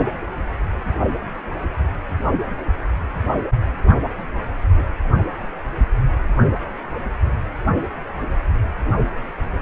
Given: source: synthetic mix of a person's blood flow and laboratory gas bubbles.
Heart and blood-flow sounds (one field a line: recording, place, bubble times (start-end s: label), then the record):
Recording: Doppler ultrasound of blood flow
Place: precordium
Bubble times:
4.76-4.82 s: bubbles
From the record:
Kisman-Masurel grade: 111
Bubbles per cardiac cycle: 1 to 2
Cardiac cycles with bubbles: 1 to 10%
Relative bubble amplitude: barely perceptible (0.100 to 0.250)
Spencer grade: 1 (occasional bubble signal discernible with the cardiac motion signal, with majority of cardiac periods free of bubbles)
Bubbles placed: only in the low amplitude regions of the cardiac cycle